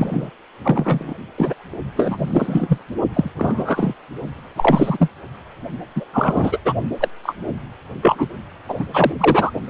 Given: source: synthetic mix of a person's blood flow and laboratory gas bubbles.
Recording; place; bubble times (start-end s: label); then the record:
Doppler ultrasound of blood flow; precordium
0.00-0.30 s: bubbles
0.64-1.14 s: bubbles
1.38-1.53 s: bubbles
1.95-2.78 s: bubbles
3.13-3.30 s: bubbles
3.37-3.94 s: bubbles
4.56-5.10 s: bubbles
5.96-6.04 s: bubbles
6.13-6.58 s: bubbles
6.65-6.73 s: bubbles
7.00-7.08 s: bubbles
7.23-7.34 s: bubbles
8.02-8.29 s: bubbles
8.69-8.85 s: bubbles
8.94-9.12 s: bubbles
9.20-9.50 s: bubbles
From the record:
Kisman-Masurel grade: 243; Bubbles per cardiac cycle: several, 3 to 8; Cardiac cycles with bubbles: 100%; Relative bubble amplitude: loud (0.450 to 0.775); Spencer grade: 3 (all of the cardiac periods contain showers or single bubble signals, but not dominating or overriding the cardiac motion signals); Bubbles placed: only in the low amplitude regions of the cardiac cycle